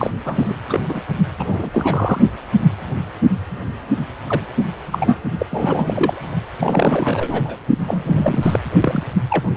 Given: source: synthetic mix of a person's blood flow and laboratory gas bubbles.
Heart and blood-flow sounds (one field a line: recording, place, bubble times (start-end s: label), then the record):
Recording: Doppler ultrasound of blood flow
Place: precordium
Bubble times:
0.00-0.11 s: bubbles
0.25-0.55 s: bubbles
0.69-0.80 s: bubbles
0.89-1.00 s: bubbles
1.39-1.70 s: bubbles
1.73-2.21 s: bubbles
4.29-4.41 s: bubbles
4.57-4.66 s: bubbles
4.92-5.16 s: bubbles
5.38-5.46 s: bubbles
5.50-6.25 s: bubbles
6.58-7.58 s: bubbles
7.79-8.60 s: bubbles
8.81-9.04 s: bubbles
9.29-9.50 s: bubbles
From the record:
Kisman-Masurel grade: 232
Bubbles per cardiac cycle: several, 3 to 8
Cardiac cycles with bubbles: 50 to 99%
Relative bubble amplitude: moderate (0.250 to 0.450)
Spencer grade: 3 (all of the cardiac periods contain showers or single bubble signals, but not dominating or overriding the cardiac motion signals)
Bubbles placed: only in the low amplitude regions of the cardiac cycle